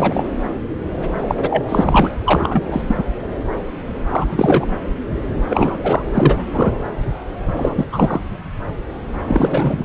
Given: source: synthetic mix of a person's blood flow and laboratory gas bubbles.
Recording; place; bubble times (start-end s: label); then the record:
Doppler ultrasound of blood flow; subclavian vein
0.00-0.23 s: bubbles
1.28-1.35 s: bubbles
1.39-2.16 s: bubbles
2.25-2.82 s: bubbles
2.87-2.96 s: bubbles
4.09-4.69 s: bubbles
5.50-5.78 s: bubbles
5.83-6.02 s: bubbles
6.13-6.48 s: bubbles
6.52-6.71 s: bubbles
7.56-7.87 s: bubbles
7.92-8.21 s: bubbles
9.28-9.84 s: bubbles
From the record:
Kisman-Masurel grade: 333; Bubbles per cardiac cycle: rolling drumbeat, 9 or more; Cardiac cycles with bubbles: 50 to 99%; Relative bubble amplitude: loud (0.450 to 0.775); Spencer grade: 3 (all of the cardiac periods contain showers or single bubble signals, but not dominating or overriding the cardiac motion signals); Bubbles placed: anywhere in the cardiac cycle